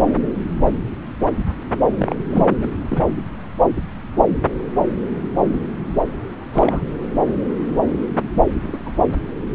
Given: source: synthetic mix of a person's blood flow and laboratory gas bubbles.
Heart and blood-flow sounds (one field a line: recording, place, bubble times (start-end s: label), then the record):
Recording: Doppler ultrasound of blood flow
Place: subclavian vein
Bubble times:
1.98-2.16 s: bubbles
2.19-2.23 s: bubbles
2.31-2.46 s: bubbles
2.61-2.67 s: bubbles
2.90-3.07 s: bubbles
6.53-6.83 s: bubbles
8.63-8.78 s: bubbles
8.85-8.92 s: bubbles
From the record:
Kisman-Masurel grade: 222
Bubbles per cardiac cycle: several, 3 to 8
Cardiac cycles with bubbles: 10 to 50%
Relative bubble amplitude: moderate (0.250 to 0.450)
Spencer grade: 2 (many but less than half of the cardiac periods contain bubble signals, singularly or in groups)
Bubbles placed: anywhere in the cardiac cycle